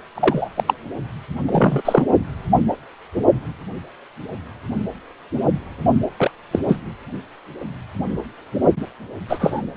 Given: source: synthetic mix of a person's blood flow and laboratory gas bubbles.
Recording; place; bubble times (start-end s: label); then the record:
Doppler ultrasound of blood flow; precordium
0.15-0.49 s: bubbles
0.55-0.64 s: bubbles
0.67-0.73 s: bubbles
1.46-1.82 s: bubbles
1.85-2.05 s: bubbles
6.17-6.31 s: bubbles
6.51-6.60 s: bubbles
6.68-6.77 s: bubbles
9.29-9.62 s: bubbles
From the record:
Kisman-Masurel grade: 223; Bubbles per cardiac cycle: several, 3 to 8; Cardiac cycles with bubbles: 10 to 50%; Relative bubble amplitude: loud (0.450 to 0.775); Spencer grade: 2 (many but less than half of the cardiac periods contain bubble signals, singularly or in groups); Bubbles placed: only in the low amplitude regions of the cardiac cycle